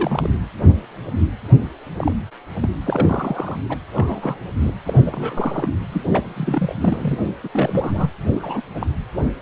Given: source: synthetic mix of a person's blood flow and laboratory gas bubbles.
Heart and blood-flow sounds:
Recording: Doppler ultrasound of blood flow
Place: precordium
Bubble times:
0.00-0.30 s: bubbles
1.97-2.13 s: bubbles
2.60-2.68 s: bubbles
2.84-3.56 s: bubbles
3.68-3.77 s: bubbles
3.95-4.38 s: bubbles
4.60-4.73 s: bubbles
4.85-5.02 s: bubbles
5.06-5.69 s: bubbles
5.92-6.01 s: bubbles
6.11-6.73 s: bubbles
6.80-7.18 s: bubbles
7.25-7.29 s: bubbles
7.43-7.48 s: bubbles
7.53-8.11 s: bubbles
8.33-8.61 s: bubbles
8.80-8.87 s: bubbles
From the record:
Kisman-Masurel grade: 232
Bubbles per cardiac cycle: several, 3 to 8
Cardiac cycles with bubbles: 50 to 99%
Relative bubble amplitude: moderate (0.250 to 0.450)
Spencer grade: 3 (all of the cardiac periods contain showers or single bubble signals, but not dominating or overriding the cardiac motion signals)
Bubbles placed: anywhere in the cardiac cycle

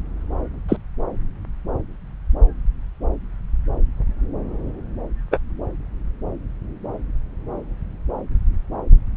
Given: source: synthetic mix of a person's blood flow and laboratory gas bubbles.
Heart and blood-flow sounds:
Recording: Doppler ultrasound of blood flow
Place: subclavian vein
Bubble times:
0.68-0.77 s: bubbles
5.31-5.40 s: bubbles
From the record:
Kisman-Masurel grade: 123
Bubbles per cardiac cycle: 1 to 2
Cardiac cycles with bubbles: 10 to 50%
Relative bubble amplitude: loud (0.450 to 0.775)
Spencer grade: 2 (many but less than half of the cardiac periods contain bubble signals, singularly or in groups)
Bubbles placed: anywhere in the cardiac cycle

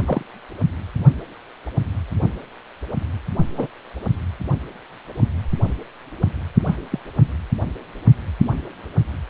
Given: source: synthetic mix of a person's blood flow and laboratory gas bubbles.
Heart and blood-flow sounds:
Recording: Doppler ultrasound of blood flow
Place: precordium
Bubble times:
0.06-0.23 s: bubbles
3.56-3.67 s: bubbles
6.67-6.76 s: bubbles
6.91-7.00 s: bubbles
From the record:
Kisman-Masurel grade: 122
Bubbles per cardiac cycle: 1 to 2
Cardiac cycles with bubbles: 10 to 50%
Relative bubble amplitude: moderate (0.250 to 0.450)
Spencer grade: 2 (many but less than half of the cardiac periods contain bubble signals, singularly or in groups)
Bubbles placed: only in the low amplitude regions of the cardiac cycle

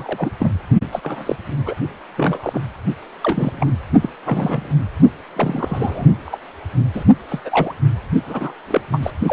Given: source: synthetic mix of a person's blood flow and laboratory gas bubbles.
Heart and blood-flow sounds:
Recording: Doppler ultrasound of blood flow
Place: precordium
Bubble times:
0.00-0.31 s: bubbles
0.39-0.52 s: bubbles
0.92-1.36 s: bubbles
1.66-1.75 s: bubbles
2.17-2.60 s: bubbles
3.23-3.72 s: bubbles
4.01-4.09 s: bubbles
4.25-4.75 s: bubbles
5.36-6.07 s: bubbles
6.25-6.38 s: bubbles
6.94-7.04 s: bubbles
7.28-7.40 s: bubbles
7.45-7.73 s: bubbles
8.26-8.53 s: bubbles
8.67-8.81 s: bubbles
8.92-9.00 s: bubbles
9.03-9.11 s: bubbles
9.26-9.33 s: bubbles
From the record:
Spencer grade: 3 (all of the cardiac periods contain showers or single bubble signals, but not dominating or overriding the cardiac motion signals)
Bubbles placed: only in the low amplitude regions of the cardiac cycle

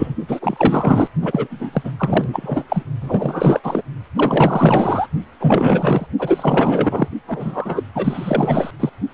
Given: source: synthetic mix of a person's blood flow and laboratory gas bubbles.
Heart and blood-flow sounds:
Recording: Doppler ultrasound of blood flow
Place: precordium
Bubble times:
0.00-0.15 s: bubbles
0.28-1.08 s: bubbles
1.22-1.48 s: bubbles
1.50-1.92 s: bubbles
1.97-2.83 s: bubbles
3.01-3.60 s: bubbles
3.63-3.83 s: bubbles
4.16-5.07 s: bubbles
5.40-6.07 s: bubbles
6.19-7.08 s: bubbles
7.26-7.84 s: bubbles
7.95-8.71 s: bubbles
8.79-8.89 s: bubbles
9.12-9.14 s: bubbles
From the record:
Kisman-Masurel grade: 444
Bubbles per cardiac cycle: continuous sound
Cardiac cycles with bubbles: 100%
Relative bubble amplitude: maximal (0.775 to 0.999)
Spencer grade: 4 (maximum detectable bubble signal sounding continuously throughout systole and diastole of every cardiac period, and overriding the amplitude of the normal cardiac signals)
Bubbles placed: only in the low amplitude regions of the cardiac cycle

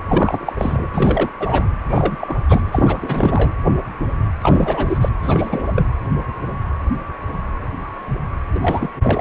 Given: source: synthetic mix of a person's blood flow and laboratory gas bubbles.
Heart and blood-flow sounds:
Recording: Doppler ultrasound of blood flow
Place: precordium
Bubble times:
0.08-0.53 s: bubbles
0.57-0.90 s: bubbles
0.93-1.30 s: bubbles
1.40-1.70 s: bubbles
1.88-2.37 s: bubbles
2.49-2.62 s: bubbles
2.71-3.52 s: bubbles
4.42-5.09 s: bubbles
5.22-5.63 s: bubbles
5.75-5.87 s: bubbles
8.55-8.89 s: bubbles
9.02-9.21 s: bubbles
From the record:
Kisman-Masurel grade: 333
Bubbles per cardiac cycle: rolling drumbeat, 9 or more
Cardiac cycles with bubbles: 50 to 99%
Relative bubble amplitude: loud (0.450 to 0.775)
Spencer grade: 3 (all of the cardiac periods contain showers or single bubble signals, but not dominating or overriding the cardiac motion signals)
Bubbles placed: anywhere in the cardiac cycle

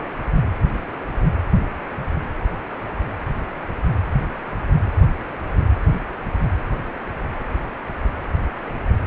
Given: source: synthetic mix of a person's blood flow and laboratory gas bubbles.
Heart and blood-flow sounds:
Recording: Doppler ultrasound of blood flow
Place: precordium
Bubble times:
0.00-0.07 s: bubbles
From the record:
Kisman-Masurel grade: 112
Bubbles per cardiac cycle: 1 to 2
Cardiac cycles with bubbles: 1 to 10%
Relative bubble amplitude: moderate (0.250 to 0.450)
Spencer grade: 1 (occasional bubble signal discernible with the cardiac motion signal, with majority of cardiac periods free of bubbles)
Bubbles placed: anywhere in the cardiac cycle

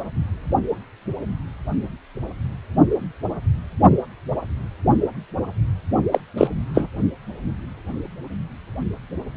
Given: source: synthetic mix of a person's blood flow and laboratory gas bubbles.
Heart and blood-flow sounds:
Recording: Doppler ultrasound of blood flow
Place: precordium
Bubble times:
6.12-6.21 s: bubbles
6.37-6.47 s: bubbles
6.75-6.87 s: bubbles
From the record:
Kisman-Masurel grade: 213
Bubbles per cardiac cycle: several, 3 to 8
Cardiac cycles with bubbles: 1 to 10%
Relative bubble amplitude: loud (0.450 to 0.775)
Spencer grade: 1 (occasional bubble signal discernible with the cardiac motion signal, with majority of cardiac periods free of bubbles)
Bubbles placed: only in the low amplitude regions of the cardiac cycle

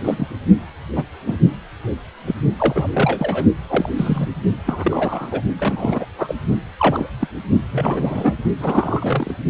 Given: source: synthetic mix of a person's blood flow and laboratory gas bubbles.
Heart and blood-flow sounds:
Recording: Doppler ultrasound of blood flow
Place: precordium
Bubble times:
0.04-0.28 s: bubbles
0.95-1.03 s: bubbles
1.27-1.38 s: bubbles
2.26-2.35 s: bubbles
2.58-2.88 s: bubbles
2.93-3.45 s: bubbles
3.69-3.90 s: bubbles
3.96-4.27 s: bubbles
4.67-5.41 s: bubbles
5.58-6.05 s: bubbles
6.18-6.34 s: bubbles
6.78-7.08 s: bubbles
7.20-7.28 s: bubbles
7.71-8.34 s: bubbles
8.59-9.34 s: bubbles
From the record:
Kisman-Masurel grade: 232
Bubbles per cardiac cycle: several, 3 to 8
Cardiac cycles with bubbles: 50 to 99%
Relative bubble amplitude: moderate (0.250 to 0.450)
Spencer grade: 3 (all of the cardiac periods contain showers or single bubble signals, but not dominating or overriding the cardiac motion signals)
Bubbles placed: only in the low amplitude regions of the cardiac cycle

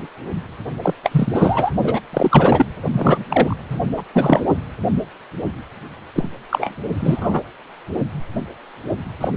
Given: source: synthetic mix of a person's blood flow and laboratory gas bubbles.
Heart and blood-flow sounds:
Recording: Doppler ultrasound of blood flow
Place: precordium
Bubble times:
0.82-0.94 s: bubbles
1.03-1.71 s: bubbles
1.83-2.00 s: bubbles
2.13-2.66 s: bubbles
2.92-3.56 s: bubbles
3.70-3.80 s: bubbles
3.97-4.03 s: bubbles
4.13-4.43 s: bubbles
6.15-6.29 s: bubbles
6.50-6.75 s: bubbles
7.00-7.40 s: bubbles
9.21-9.29 s: bubbles
From the record:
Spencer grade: 3 (all of the cardiac periods contain showers or single bubble signals, but not dominating or overriding the cardiac motion signals)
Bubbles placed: anywhere in the cardiac cycle

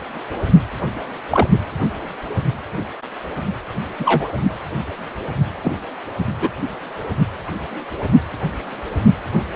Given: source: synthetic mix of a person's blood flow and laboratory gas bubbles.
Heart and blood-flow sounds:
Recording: Doppler ultrasound of blood flow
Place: precordium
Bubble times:
1.31-1.47 s: bubbles
3.99-4.30 s: bubbles
5.62-5.78 s: bubbles
6.41-6.50 s: bubbles
From the record:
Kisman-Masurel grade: 123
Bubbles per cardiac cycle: 1 to 2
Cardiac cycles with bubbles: 10 to 50%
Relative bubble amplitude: loud (0.450 to 0.775)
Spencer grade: 2 (many but less than half of the cardiac periods contain bubble signals, singularly or in groups)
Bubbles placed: only in the low amplitude regions of the cardiac cycle

